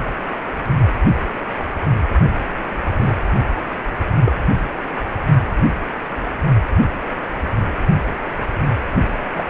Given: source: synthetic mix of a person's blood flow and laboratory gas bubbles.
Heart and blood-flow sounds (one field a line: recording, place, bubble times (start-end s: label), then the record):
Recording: Doppler ultrasound of blood flow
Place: precordium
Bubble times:
2.99-3.17 s: bubbles
4.25-4.32 s: bubbles
9.36-9.45 s: bubbles
From the record:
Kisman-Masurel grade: 122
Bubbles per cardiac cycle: 1 to 2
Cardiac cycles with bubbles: 10 to 50%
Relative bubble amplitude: moderate (0.250 to 0.450)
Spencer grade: 2 (many but less than half of the cardiac periods contain bubble signals, singularly or in groups)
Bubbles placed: only in the low amplitude regions of the cardiac cycle